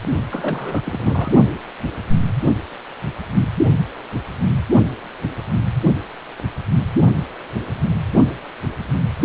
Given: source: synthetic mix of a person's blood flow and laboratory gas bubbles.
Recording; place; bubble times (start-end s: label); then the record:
Doppler ultrasound of blood flow; precordium
0.31-0.82 s: bubbles
0.84-1.32 s: bubbles
From the record:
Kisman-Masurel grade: 221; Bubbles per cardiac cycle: several, 3 to 8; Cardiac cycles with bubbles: 10 to 50%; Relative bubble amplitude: barely perceptible (0.100 to 0.250); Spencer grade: 2 (many but less than half of the cardiac periods contain bubble signals, singularly or in groups); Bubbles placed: only in the low amplitude regions of the cardiac cycle